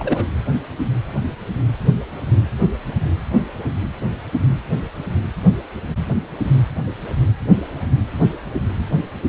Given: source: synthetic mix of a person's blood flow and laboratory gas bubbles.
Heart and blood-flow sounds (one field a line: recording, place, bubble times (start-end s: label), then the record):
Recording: Doppler ultrasound of blood flow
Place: precordium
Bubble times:
0.00-0.26 s: bubbles
From the record:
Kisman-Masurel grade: 212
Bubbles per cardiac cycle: several, 3 to 8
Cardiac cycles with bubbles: 1 to 10%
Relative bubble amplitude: moderate (0.250 to 0.450)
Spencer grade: 1 (occasional bubble signal discernible with the cardiac motion signal, with majority of cardiac periods free of bubbles)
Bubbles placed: anywhere in the cardiac cycle